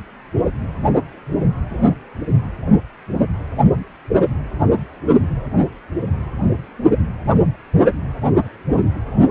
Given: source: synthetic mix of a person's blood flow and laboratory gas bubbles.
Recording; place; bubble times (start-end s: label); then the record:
Doppler ultrasound of blood flow; precordium
no bubbles
From the record:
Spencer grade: 0 (complete lack of bubble signals)